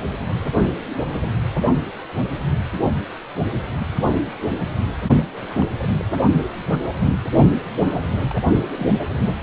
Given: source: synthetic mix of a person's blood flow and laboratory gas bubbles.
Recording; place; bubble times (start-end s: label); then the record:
Doppler ultrasound of blood flow; precordium
5.61-5.65 s: bubbles
5.82-5.87 s: bubbles
5.99-6.04 s: bubbles
7.79-7.93 s: bubbles
8.13-8.39 s: bubbles
8.77-8.88 s: bubbles
9.17-9.36 s: bubbles
From the record:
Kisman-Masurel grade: 221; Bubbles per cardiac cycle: several, 3 to 8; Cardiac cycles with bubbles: 10 to 50%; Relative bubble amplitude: barely perceptible (0.100 to 0.250); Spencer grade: 2 (many but less than half of the cardiac periods contain bubble signals, singularly or in groups); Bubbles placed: only in the low amplitude regions of the cardiac cycle